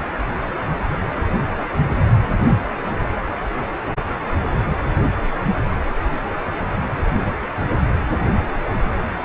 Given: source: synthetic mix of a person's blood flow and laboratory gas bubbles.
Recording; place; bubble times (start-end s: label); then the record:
Doppler ultrasound of blood flow; precordium
no bubbles
From the record:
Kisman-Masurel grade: 000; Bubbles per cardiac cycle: 0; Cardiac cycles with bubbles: 0%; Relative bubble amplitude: no bubbles discernible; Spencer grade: 0 (complete lack of bubble signals)